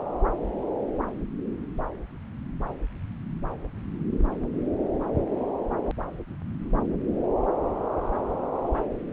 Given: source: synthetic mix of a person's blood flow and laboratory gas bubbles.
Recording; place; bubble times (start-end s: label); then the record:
Doppler ultrasound of blood flow; subclavian vein
no bubbles
From the record:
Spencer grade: 0 (complete lack of bubble signals)